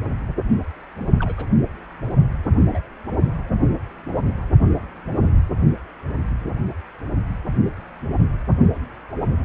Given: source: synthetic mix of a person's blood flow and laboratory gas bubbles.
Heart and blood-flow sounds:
Doppler ultrasound of blood flow; precordium
0.99-1.05 s: bubbles
1.20-1.49 s: bubbles
2.69-2.81 s: bubbles
From the record:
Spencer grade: 2 (many but less than half of the cardiac periods contain bubble signals, singularly or in groups); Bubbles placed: only in the low amplitude regions of the cardiac cycle

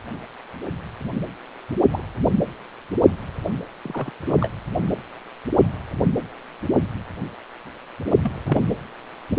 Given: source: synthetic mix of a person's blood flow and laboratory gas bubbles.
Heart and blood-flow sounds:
Doppler ultrasound of blood flow; precordium
1.91-2.04 s: bubbles
3.83-4.10 s: bubbles
4.27-4.50 s: bubbles
8.21-8.33 s: bubbles
8.46-8.66 s: bubbles
From the record:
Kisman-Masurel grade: 121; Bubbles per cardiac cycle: 1 to 2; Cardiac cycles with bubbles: 10 to 50%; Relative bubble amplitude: barely perceptible (0.100 to 0.250); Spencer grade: 2 (many but less than half of the cardiac periods contain bubble signals, singularly or in groups); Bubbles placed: anywhere in the cardiac cycle

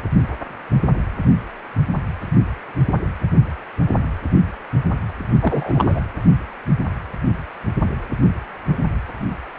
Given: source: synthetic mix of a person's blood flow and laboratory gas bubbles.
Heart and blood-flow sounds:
Doppler ultrasound of blood flow; precordium
5.40-6.00 s: bubbles
From the record:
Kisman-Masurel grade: 223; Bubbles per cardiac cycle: several, 3 to 8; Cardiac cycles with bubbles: 10 to 50%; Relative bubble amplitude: loud (0.450 to 0.775); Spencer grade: 2 (many but less than half of the cardiac periods contain bubble signals, singularly or in groups); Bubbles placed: anywhere in the cardiac cycle

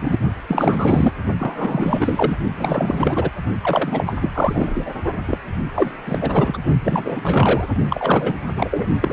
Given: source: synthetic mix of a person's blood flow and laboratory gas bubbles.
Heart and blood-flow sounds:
Doppler ultrasound of blood flow; precordium
0.01-0.18 s: bubbles
0.48-1.12 s: bubbles
1.39-2.37 s: bubbles
2.56-3.31 s: bubbles
3.61-4.16 s: bubbles
4.21-4.91 s: bubbles
5.27-5.38 s: bubbles
5.74-5.91 s: bubbles
6.05-6.18 s: bubbles
6.21-6.58 s: bubbles
6.84-7.67 s: bubbles
7.90-8.34 s: bubbles
8.56-8.86 s: bubbles
9.01-9.13 s: bubbles
From the record:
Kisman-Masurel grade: 444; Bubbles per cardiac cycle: continuous sound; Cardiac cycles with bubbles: 100%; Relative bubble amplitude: maximal (0.775 to 0.999); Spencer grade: 4 (maximum detectable bubble signal sounding continuously throughout systole and diastole of every cardiac period, and overriding the amplitude of the normal cardiac signals); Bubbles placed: only in the low amplitude regions of the cardiac cycle

